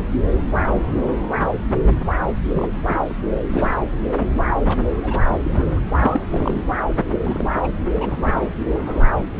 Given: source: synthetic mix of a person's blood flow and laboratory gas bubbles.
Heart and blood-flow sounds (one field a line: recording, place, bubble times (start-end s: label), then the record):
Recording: Doppler ultrasound of blood flow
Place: subclavian vein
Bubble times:
2.46-2.68 s: bubbles
2.85-3.01 s: bubbles
3.10-3.13 s: bubbles
3.53-3.74 s: bubbles
4.19-4.26 s: bubbles
4.68-4.77 s: bubbles
5.03-5.80 s: bubbles
5.98-6.22 s: bubbles
6.30-6.61 s: bubbles
7.23-7.67 s: bubbles
7.94-8.48 s: bubbles
8.64-8.79 s: bubbles
8.81-9.05 s: bubbles
From the record:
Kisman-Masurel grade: 222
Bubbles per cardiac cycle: several, 3 to 8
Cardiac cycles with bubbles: 10 to 50%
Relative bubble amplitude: moderate (0.250 to 0.450)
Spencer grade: 2 (many but less than half of the cardiac periods contain bubble signals, singularly or in groups)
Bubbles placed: anywhere in the cardiac cycle